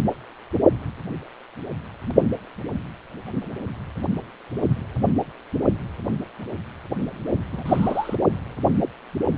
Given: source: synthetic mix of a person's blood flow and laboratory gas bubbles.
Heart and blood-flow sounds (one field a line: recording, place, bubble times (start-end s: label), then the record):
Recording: Doppler ultrasound of blood flow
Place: precordium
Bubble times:
7.53-8.15 s: bubbles
From the record:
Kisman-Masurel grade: 211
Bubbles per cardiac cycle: several, 3 to 8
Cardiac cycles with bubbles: 1 to 10%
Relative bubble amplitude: barely perceptible (0.100 to 0.250)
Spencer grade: 1 (occasional bubble signal discernible with the cardiac motion signal, with majority of cardiac periods free of bubbles)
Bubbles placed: anywhere in the cardiac cycle